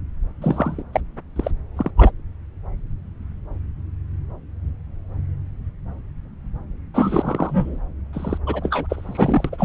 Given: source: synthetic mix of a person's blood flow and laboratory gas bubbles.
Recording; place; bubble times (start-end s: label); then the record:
Doppler ultrasound of blood flow; subclavian vein
0.42-0.83 s: bubbles
0.94-1.00 s: bubbles
1.35-1.51 s: bubbles
1.77-1.90 s: bubbles
1.97-2.12 s: bubbles
6.94-7.79 s: bubbles
8.13-8.38 s: bubbles
8.46-9.49 s: bubbles
9.52-9.64 s: bubbles
From the record:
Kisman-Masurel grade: 333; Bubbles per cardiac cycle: rolling drumbeat, 9 or more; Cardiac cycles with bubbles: 50 to 99%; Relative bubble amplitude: loud (0.450 to 0.775); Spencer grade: 3 (all of the cardiac periods contain showers or single bubble signals, but not dominating or overriding the cardiac motion signals); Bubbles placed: anywhere in the cardiac cycle